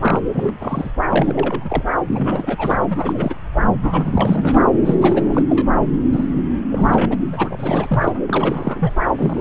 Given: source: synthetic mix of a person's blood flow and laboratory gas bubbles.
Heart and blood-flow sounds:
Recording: Doppler ultrasound of blood flow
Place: subclavian vein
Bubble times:
0.02-0.20 s: bubbles
0.33-0.53 s: bubbles
0.59-0.91 s: bubbles
1.08-1.83 s: bubbles
2.08-2.77 s: bubbles
2.90-3.35 s: bubbles
3.82-4.68 s: bubbles
4.85-4.95 s: bubbles
5.01-5.42 s: bubbles
5.49-5.67 s: bubbles
6.11-6.42 s: bubbles
6.69-7.14 s: bubbles
7.32-8.12 s: bubbles
8.27-8.94 s: bubbles
9.17-9.41 s: bubbles
From the record:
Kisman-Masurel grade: 342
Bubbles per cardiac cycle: rolling drumbeat, 9 or more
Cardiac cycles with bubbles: 100%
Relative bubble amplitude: moderate (0.250 to 0.450)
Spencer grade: 3 (all of the cardiac periods contain showers or single bubble signals, but not dominating or overriding the cardiac motion signals)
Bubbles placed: anywhere in the cardiac cycle

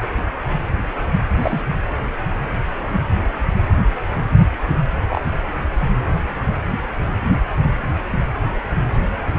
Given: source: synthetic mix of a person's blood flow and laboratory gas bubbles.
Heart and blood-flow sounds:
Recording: Doppler ultrasound of blood flow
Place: precordium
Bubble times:
1.42-1.64 s: bubbles
5.09-5.21 s: bubbles
From the record:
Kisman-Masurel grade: 122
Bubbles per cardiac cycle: 1 to 2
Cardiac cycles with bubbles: 10 to 50%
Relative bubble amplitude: moderate (0.250 to 0.450)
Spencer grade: 2 (many but less than half of the cardiac periods contain bubble signals, singularly or in groups)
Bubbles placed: anywhere in the cardiac cycle

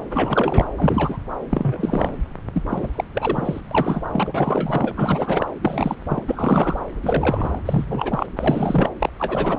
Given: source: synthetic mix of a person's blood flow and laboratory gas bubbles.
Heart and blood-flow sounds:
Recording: Doppler ultrasound of blood flow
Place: subclavian vein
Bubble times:
0.10-0.65 s: bubbles
0.78-1.17 s: bubbles
1.49-2.16 s: bubbles
2.54-2.62 s: bubbles
2.68-2.92 s: bubbles
2.95-3.04 s: bubbles
3.15-3.61 s: bubbles
3.71-4.03 s: bubbles
4.12-5.46 s: bubbles
5.62-5.95 s: bubbles
6.08-6.23 s: bubbles
6.27-6.79 s: bubbles
7.03-7.62 s: bubbles
7.65-8.27 s: bubbles
8.37-8.90 s: bubbles
9.00-9.10 s: bubbles
9.12-9.59 s: bubbles
From the record:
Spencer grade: 3 (all of the cardiac periods contain showers or single bubble signals, but not dominating or overriding the cardiac motion signals)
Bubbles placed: anywhere in the cardiac cycle

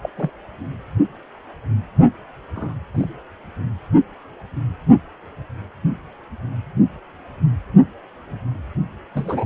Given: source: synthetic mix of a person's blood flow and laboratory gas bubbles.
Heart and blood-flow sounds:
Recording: Doppler ultrasound of blood flow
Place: precordium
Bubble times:
0.02-0.09 s: bubbles
0.17-0.30 s: bubbles
2.55-2.75 s: bubbles
2.95-3.08 s: bubbles
9.13-9.45 s: bubbles
From the record:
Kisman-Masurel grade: 122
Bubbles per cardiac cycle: 1 to 2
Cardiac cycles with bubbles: 10 to 50%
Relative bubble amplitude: moderate (0.250 to 0.450)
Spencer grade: 2 (many but less than half of the cardiac periods contain bubble signals, singularly or in groups)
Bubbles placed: only in the low amplitude regions of the cardiac cycle

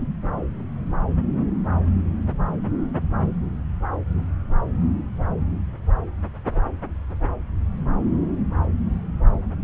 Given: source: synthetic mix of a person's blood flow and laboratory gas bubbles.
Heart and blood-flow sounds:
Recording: Doppler ultrasound of blood flow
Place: subclavian vein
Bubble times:
no bubbles
From the record:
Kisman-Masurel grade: 000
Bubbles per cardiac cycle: 0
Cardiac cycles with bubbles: 0%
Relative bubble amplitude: no bubbles discernible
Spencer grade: 0 (complete lack of bubble signals)

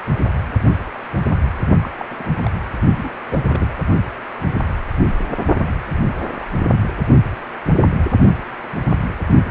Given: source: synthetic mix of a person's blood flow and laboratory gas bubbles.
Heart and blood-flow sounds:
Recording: Doppler ultrasound of blood flow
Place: precordium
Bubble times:
1.81-1.91 s: bubbles
2.00-2.27 s: bubbles
2.45-2.50 s: bubbles
2.97-3.10 s: bubbles
3.31-3.75 s: bubbles
5.57-5.79 s: bubbles
6.18-6.22 s: bubbles
6.40-6.47 s: bubbles
From the record:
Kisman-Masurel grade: 221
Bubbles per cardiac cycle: several, 3 to 8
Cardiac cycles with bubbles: 10 to 50%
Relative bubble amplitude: barely perceptible (0.100 to 0.250)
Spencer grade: 2 (many but less than half of the cardiac periods contain bubble signals, singularly or in groups)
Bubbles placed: only in the low amplitude regions of the cardiac cycle

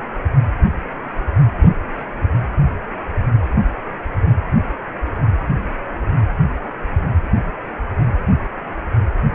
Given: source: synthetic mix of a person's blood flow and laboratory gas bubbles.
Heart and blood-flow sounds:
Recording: Doppler ultrasound of blood flow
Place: precordium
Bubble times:
no bubbles
From the record:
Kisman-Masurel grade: 000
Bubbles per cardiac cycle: 0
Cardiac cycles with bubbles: 0%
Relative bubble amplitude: no bubbles discernible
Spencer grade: 0 (complete lack of bubble signals)

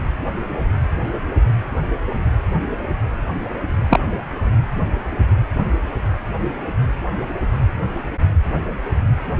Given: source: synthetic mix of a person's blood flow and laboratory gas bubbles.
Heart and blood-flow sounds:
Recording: Doppler ultrasound of blood flow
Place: precordium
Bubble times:
3.90-4.00 s: bubbles
From the record:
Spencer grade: 1 (occasional bubble signal discernible with the cardiac motion signal, with majority of cardiac periods free of bubbles)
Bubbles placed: anywhere in the cardiac cycle

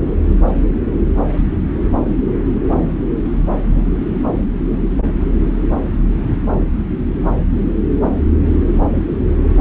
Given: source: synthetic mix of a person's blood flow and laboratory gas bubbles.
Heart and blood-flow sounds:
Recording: Doppler ultrasound of blood flow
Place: subclavian vein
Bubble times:
no bubbles
From the record:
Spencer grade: 0 (complete lack of bubble signals)

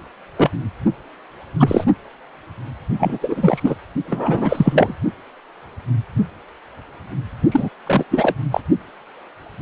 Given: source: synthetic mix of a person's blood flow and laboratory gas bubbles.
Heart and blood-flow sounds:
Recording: Doppler ultrasound of blood flow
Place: precordium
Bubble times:
0.38-0.50 s: bubbles
1.60-1.84 s: bubbles
2.99-3.19 s: bubbles
3.21-3.75 s: bubbles
4.06-4.96 s: bubbles
7.51-7.69 s: bubbles
7.86-8.04 s: bubbles
8.11-8.35 s: bubbles
8.52-8.60 s: bubbles
From the record:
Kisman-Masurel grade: 223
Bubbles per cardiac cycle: several, 3 to 8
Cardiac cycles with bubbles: 10 to 50%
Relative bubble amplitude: loud (0.450 to 0.775)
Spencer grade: 2 (many but less than half of the cardiac periods contain bubble signals, singularly or in groups)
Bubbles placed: only in the low amplitude regions of the cardiac cycle

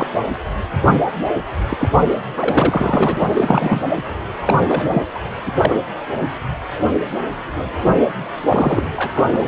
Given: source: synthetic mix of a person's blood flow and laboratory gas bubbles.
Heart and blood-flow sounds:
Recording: Doppler ultrasound of blood flow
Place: precordium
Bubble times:
0.00-0.06 s: bubbles
1.69-1.89 s: bubbles
2.36-3.27 s: bubbles
3.34-3.82 s: bubbles
3.96-4.01 s: bubbles
4.42-5.04 s: bubbles
5.14-5.19 s: bubbles
5.46-5.51 s: bubbles
5.56-5.79 s: bubbles
8.48-8.83 s: bubbles
8.96-9.24 s: bubbles
9.32-9.45 s: bubbles
From the record:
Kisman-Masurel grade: 333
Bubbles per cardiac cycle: rolling drumbeat, 9 or more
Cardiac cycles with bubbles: 50 to 99%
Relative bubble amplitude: loud (0.450 to 0.775)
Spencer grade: 3 (all of the cardiac periods contain showers or single bubble signals, but not dominating or overriding the cardiac motion signals)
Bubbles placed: anywhere in the cardiac cycle

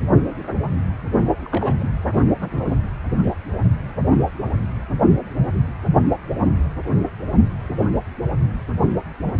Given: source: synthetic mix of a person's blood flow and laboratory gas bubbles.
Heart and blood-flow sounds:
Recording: Doppler ultrasound of blood flow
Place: precordium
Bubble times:
1.40-1.74 s: bubbles
1.79-1.88 s: bubbles
2.42-2.75 s: bubbles
3.23-3.37 s: bubbles
From the record:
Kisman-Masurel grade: 221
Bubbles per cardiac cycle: several, 3 to 8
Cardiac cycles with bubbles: 10 to 50%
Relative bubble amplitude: barely perceptible (0.100 to 0.250)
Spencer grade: 2 (many but less than half of the cardiac periods contain bubble signals, singularly or in groups)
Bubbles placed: only in the low amplitude regions of the cardiac cycle

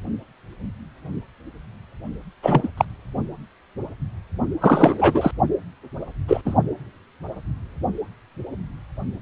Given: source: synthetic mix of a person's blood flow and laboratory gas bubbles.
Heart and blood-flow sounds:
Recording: Doppler ultrasound of blood flow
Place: precordium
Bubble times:
2.42-2.69 s: bubbles
2.77-2.85 s: bubbles
4.60-5.31 s: bubbles
6.27-6.42 s: bubbles
6.45-6.54 s: bubbles
From the record:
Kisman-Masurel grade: 223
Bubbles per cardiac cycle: several, 3 to 8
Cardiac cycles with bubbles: 10 to 50%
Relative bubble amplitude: loud (0.450 to 0.775)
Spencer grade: 2 (many but less than half of the cardiac periods contain bubble signals, singularly or in groups)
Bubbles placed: only in the low amplitude regions of the cardiac cycle

